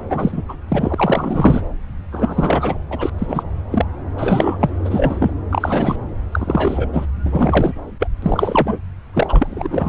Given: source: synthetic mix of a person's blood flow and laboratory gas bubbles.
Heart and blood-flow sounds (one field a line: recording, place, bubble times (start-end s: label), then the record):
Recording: Doppler ultrasound of blood flow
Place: subclavian vein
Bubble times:
0.09-0.42 s: bubbles
0.49-0.55 s: bubbles
0.68-1.61 s: bubbles
2.12-2.78 s: bubbles
2.90-3.10 s: bubbles
3.19-3.43 s: bubbles
3.72-3.85 s: bubbles
4.17-4.70 s: bubbles
4.84-5.34 s: bubbles
5.50-5.98 s: bubbles
6.32-6.88 s: bubbles
6.92-7.06 s: bubbles
7.25-7.73 s: bubbles
8.00-8.07 s: bubbles
8.22-8.79 s: bubbles
9.13-9.89 s: bubbles
From the record:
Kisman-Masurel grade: 342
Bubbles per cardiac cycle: rolling drumbeat, 9 or more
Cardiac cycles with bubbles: 100%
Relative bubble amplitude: moderate (0.250 to 0.450)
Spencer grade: 3 (all of the cardiac periods contain showers or single bubble signals, but not dominating or overriding the cardiac motion signals)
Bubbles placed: anywhere in the cardiac cycle